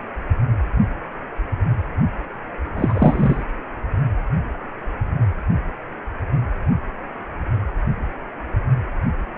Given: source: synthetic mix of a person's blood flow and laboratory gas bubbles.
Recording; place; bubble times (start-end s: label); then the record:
Doppler ultrasound of blood flow; precordium
2.76-3.44 s: bubbles
From the record:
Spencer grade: 1 (occasional bubble signal discernible with the cardiac motion signal, with majority of cardiac periods free of bubbles); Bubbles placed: anywhere in the cardiac cycle